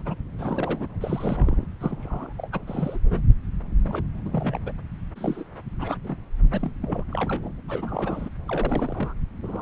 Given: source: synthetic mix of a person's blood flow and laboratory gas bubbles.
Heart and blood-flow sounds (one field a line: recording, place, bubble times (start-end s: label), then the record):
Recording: Doppler ultrasound of blood flow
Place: subclavian vein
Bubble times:
0.00-0.16 s: bubbles
0.38-0.87 s: bubbles
1.00-1.66 s: bubbles
1.81-2.33 s: bubbles
2.38-2.58 s: bubbles
2.67-2.98 s: bubbles
3.03-3.23 s: bubbles
3.84-4.04 s: bubbles
4.25-4.78 s: bubbles
5.15-5.44 s: bubbles
5.79-5.95 s: bubbles
6.04-6.16 s: bubbles
6.51-6.71 s: bubbles
6.81-7.49 s: bubbles
7.67-8.29 s: bubbles
8.48-9.13 s: bubbles
9.42-9.61 s: bubbles
From the record:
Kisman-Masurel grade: 242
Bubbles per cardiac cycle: several, 3 to 8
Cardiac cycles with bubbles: 100%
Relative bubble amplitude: moderate (0.250 to 0.450)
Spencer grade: 3 (all of the cardiac periods contain showers or single bubble signals, but not dominating or overriding the cardiac motion signals)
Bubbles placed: anywhere in the cardiac cycle